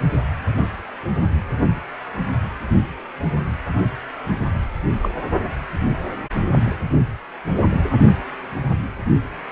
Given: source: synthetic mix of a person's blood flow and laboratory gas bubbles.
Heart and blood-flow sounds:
Doppler ultrasound of blood flow; precordium
5.02-5.14 s: bubbles
From the record:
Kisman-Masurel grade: 122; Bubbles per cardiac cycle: 1 to 2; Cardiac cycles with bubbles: 10 to 50%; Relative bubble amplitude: moderate (0.250 to 0.450); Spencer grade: 2 (many but less than half of the cardiac periods contain bubble signals, singularly or in groups); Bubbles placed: only in the low amplitude regions of the cardiac cycle

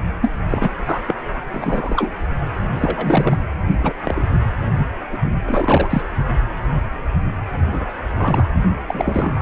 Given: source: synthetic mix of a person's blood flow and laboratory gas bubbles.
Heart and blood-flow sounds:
Doppler ultrasound of blood flow; precordium
0.21-0.31 s: bubbles
0.48-0.69 s: bubbles
0.86-1.00 s: bubbles
1.06-1.15 s: bubbles
1.51-2.12 s: bubbles
2.80-3.38 s: bubbles
3.78-3.93 s: bubbles
4.04-4.25 s: bubbles
5.12-5.18 s: bubbles
5.24-5.33 s: bubbles
5.46-6.03 s: bubbles
7.72-7.85 s: bubbles
8.16-8.47 s: bubbles
8.87-9.42 s: bubbles
From the record:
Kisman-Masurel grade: 233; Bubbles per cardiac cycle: several, 3 to 8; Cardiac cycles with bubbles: 50 to 99%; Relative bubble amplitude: loud (0.450 to 0.775); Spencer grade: 3 (all of the cardiac periods contain showers or single bubble signals, but not dominating or overriding the cardiac motion signals); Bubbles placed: only in the low amplitude regions of the cardiac cycle

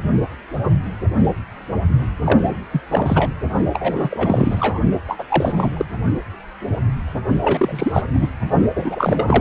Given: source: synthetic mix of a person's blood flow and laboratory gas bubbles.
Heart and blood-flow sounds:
Doppler ultrasound of blood flow; precordium
2.24-2.58 s: bubbles
2.71-2.81 s: bubbles
2.90-3.33 s: bubbles
3.73-4.79 s: bubbles
5.07-5.24 s: bubbles
5.27-5.71 s: bubbles
5.77-5.86 s: bubbles
7.41-8.03 s: bubbles
8.13-8.26 s: bubbles
8.75-9.41 s: bubbles
From the record:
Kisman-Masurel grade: 333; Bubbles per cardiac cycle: rolling drumbeat, 9 or more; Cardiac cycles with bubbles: 50 to 99%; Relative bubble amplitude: loud (0.450 to 0.775); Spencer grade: 3 (all of the cardiac periods contain showers or single bubble signals, but not dominating or overriding the cardiac motion signals); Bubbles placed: only in the low amplitude regions of the cardiac cycle

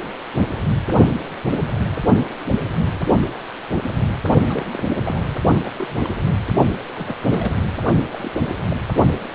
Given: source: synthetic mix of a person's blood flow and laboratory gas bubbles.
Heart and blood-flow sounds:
Doppler ultrasound of blood flow; precordium
4.49-4.64 s: bubbles
4.73-4.85 s: bubbles
4.88-4.97 s: bubbles
5.06-5.22 s: bubbles
5.63-5.71 s: bubbles
5.76-6.08 s: bubbles
6.24-6.38 s: bubbles
6.93-7.16 s: bubbles
7.25-7.58 s: bubbles
8.12-8.31 s: bubbles
8.40-8.50 s: bubbles
8.70-8.79 s: bubbles
From the record:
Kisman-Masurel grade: 221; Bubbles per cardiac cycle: several, 3 to 8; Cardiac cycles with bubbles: 10 to 50%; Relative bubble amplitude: barely perceptible (0.100 to 0.250); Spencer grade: 2 (many but less than half of the cardiac periods contain bubble signals, singularly or in groups); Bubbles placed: only in the low amplitude regions of the cardiac cycle

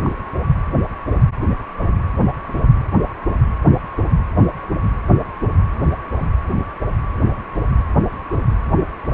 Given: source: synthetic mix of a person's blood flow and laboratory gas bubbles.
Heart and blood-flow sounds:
Doppler ultrasound of blood flow; precordium
0.03-0.10 s: bubbles
2.52-2.71 s: bubbles
From the record:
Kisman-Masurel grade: 121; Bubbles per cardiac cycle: 1 to 2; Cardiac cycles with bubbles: 10 to 50%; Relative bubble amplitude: barely perceptible (0.100 to 0.250); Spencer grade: 2 (many but less than half of the cardiac periods contain bubble signals, singularly or in groups); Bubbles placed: anywhere in the cardiac cycle

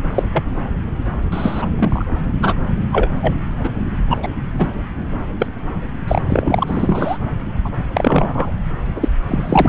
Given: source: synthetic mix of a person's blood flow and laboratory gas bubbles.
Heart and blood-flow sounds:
Doppler ultrasound of blood flow; subclavian vein
0.14-0.23 s: bubbles
0.33-0.43 s: bubbles
1.32-1.66 s: bubbles
1.78-2.06 s: bubbles
2.42-2.55 s: bubbles
2.92-3.10 s: bubbles
3.22-3.35 s: bubbles
3.64-3.70 s: bubbles
4.10-4.17 s: bubbles
4.22-4.28 s: bubbles
4.58-4.69 s: bubbles
5.39-5.46 s: bubbles
6.07-6.21 s: bubbles
6.29-6.64 s: bubbles
6.67-7.17 s: bubbles
7.64-7.70 s: bubbles
7.94-8.51 s: bubbles
8.96-9.08 s: bubbles
9.27-9.69 s: bubbles
From the record:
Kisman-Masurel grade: 243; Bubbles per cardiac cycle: several, 3 to 8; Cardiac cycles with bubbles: 100%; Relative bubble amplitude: loud (0.450 to 0.775); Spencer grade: 3 (all of the cardiac periods contain showers or single bubble signals, but not dominating or overriding the cardiac motion signals); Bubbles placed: anywhere in the cardiac cycle

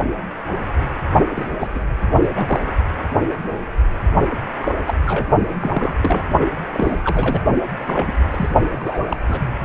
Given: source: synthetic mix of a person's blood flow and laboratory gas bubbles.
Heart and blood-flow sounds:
Doppler ultrasound of blood flow; precordium
1.35-1.53 s: bubbles
1.59-1.70 s: bubbles
1.75-1.80 s: bubbles
2.21-2.28 s: bubbles
2.32-2.60 s: bubbles
4.61-4.75 s: bubbles
4.87-4.94 s: bubbles
5.06-5.25 s: bubbles
5.62-6.28 s: bubbles
6.73-6.98 s: bubbles
7.04-7.45 s: bubbles
7.77-8.27 s: bubbles
8.30-8.51 s: bubbles
8.71-8.77 s: bubbles
8.79-8.98 s: bubbles
9.09-9.17 s: bubbles
9.29-9.59 s: bubbles
From the record:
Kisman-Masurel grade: 232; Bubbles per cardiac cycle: several, 3 to 8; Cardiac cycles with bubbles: 50 to 99%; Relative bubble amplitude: moderate (0.250 to 0.450); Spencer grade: 3 (all of the cardiac periods contain showers or single bubble signals, but not dominating or overriding the cardiac motion signals); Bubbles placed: only in the low amplitude regions of the cardiac cycle

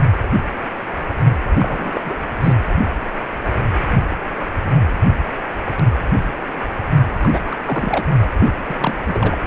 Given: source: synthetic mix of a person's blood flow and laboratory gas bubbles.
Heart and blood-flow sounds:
Doppler ultrasound of blood flow; precordium
1.59-2.01 s: bubbles
2.04-2.13 s: bubbles
2.38-2.56 s: bubbles
7.19-7.40 s: bubbles
7.46-7.56 s: bubbles
7.65-8.06 s: bubbles
8.21-8.29 s: bubbles
8.39-8.51 s: bubbles
8.70-8.75 s: bubbles
8.78-8.95 s: bubbles
9.06-9.37 s: bubbles
From the record:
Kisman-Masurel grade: 332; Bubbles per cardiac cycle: rolling drumbeat, 9 or more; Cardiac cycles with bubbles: 50 to 99%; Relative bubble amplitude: moderate (0.250 to 0.450); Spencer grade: 3 (all of the cardiac periods contain showers or single bubble signals, but not dominating or overriding the cardiac motion signals); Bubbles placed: anywhere in the cardiac cycle

